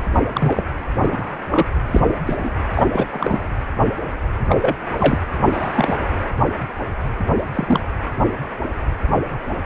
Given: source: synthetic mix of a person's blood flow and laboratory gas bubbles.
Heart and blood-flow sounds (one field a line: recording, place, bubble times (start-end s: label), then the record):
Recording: Doppler ultrasound of blood flow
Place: precordium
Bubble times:
0.12-0.21 s: bubbles
0.32-0.62 s: bubbles
1.00-1.39 s: bubbles
1.49-1.67 s: bubbles
1.86-2.00 s: bubbles
2.08-2.13 s: bubbles
2.25-2.54 s: bubbles
2.73-2.86 s: bubbles
2.92-3.06 s: bubbles
3.11-3.45 s: bubbles
4.49-4.76 s: bubbles
4.98-5.18 s: bubbles
5.41-5.97 s: bubbles
7.54-7.80 s: bubbles
From the record:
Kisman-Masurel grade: 233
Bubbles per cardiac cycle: several, 3 to 8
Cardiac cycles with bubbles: 50 to 99%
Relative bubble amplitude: loud (0.450 to 0.775)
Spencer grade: 3 (all of the cardiac periods contain showers or single bubble signals, but not dominating or overriding the cardiac motion signals)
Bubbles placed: anywhere in the cardiac cycle